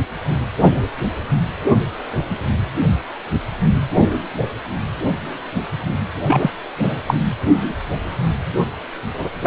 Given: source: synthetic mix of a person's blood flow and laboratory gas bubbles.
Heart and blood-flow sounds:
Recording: Doppler ultrasound of blood flow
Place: precordium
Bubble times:
6.26-6.50 s: bubbles
6.82-6.98 s: bubbles
7.06-7.14 s: bubbles
From the record:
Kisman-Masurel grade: 223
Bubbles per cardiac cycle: several, 3 to 8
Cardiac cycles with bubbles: 10 to 50%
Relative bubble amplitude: loud (0.450 to 0.775)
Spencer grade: 2 (many but less than half of the cardiac periods contain bubble signals, singularly or in groups)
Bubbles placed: anywhere in the cardiac cycle

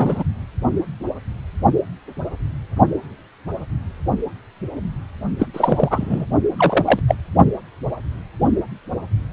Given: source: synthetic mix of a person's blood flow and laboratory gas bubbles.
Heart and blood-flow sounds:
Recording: Doppler ultrasound of blood flow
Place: precordium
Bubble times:
0.00-0.24 s: bubbles
5.39-5.47 s: bubbles
5.53-6.26 s: bubbles
6.57-7.00 s: bubbles
7.08-7.15 s: bubbles
From the record:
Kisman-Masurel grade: 223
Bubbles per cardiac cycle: several, 3 to 8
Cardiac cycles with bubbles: 10 to 50%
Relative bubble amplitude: loud (0.450 to 0.775)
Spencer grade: 2 (many but less than half of the cardiac periods contain bubble signals, singularly or in groups)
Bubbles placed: only in the low amplitude regions of the cardiac cycle

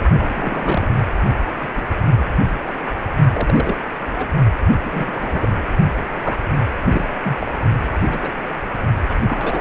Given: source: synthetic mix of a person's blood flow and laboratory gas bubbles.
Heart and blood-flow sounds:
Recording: Doppler ultrasound of blood flow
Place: precordium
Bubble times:
0.18-0.88 s: bubbles
1.61-1.69 s: bubbles
1.77-1.85 s: bubbles
2.17-2.25 s: bubbles
2.66-2.73 s: bubbles
3.33-3.77 s: bubbles
4.16-4.26 s: bubbles
4.84-5.48 s: bubbles
6.04-6.40 s: bubbles
6.82-7.05 s: bubbles
7.23-7.51 s: bubbles
7.94-8.31 s: bubbles
9.08-9.16 s: bubbles
9.28-9.61 s: bubbles
From the record:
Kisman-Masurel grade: 242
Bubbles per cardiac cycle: several, 3 to 8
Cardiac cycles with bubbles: 100%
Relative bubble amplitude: moderate (0.250 to 0.450)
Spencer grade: 3 (all of the cardiac periods contain showers or single bubble signals, but not dominating or overriding the cardiac motion signals)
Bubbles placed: only in the low amplitude regions of the cardiac cycle

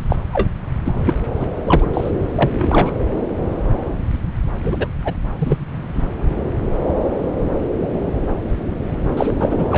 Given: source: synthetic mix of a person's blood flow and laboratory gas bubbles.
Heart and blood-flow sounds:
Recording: Doppler ultrasound of blood flow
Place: subclavian vein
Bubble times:
0.09-0.16 s: bubbles
0.33-0.49 s: bubbles
0.84-0.97 s: bubbles
1.05-1.12 s: bubbles
1.40-1.46 s: bubbles
1.65-1.85 s: bubbles
1.94-2.10 s: bubbles
2.35-2.93 s: bubbles
4.62-4.88 s: bubbles
5.04-5.14 s: bubbles
5.40-5.57 s: bubbles
5.93-6.02 s: bubbles
9.17-9.34 s: bubbles
9.39-9.78 s: bubbles
From the record:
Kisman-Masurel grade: 223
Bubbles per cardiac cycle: several, 3 to 8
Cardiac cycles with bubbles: 10 to 50%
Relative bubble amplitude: loud (0.450 to 0.775)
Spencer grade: 2 (many but less than half of the cardiac periods contain bubble signals, singularly or in groups)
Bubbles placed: anywhere in the cardiac cycle

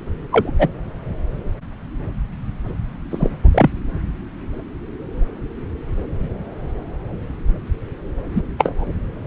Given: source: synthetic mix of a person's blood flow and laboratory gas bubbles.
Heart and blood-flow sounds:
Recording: Doppler ultrasound of blood flow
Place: subclavian vein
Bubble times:
0.31-0.51 s: bubbles
0.58-0.67 s: bubbles
3.10-3.28 s: bubbles
3.51-3.70 s: bubbles
8.35-8.42 s: bubbles
8.58-8.89 s: bubbles
From the record:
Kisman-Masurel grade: 123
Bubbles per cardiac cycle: 1 to 2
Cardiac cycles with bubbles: 10 to 50%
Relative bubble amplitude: loud (0.450 to 0.775)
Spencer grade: 2 (many but less than half of the cardiac periods contain bubble signals, singularly or in groups)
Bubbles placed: anywhere in the cardiac cycle

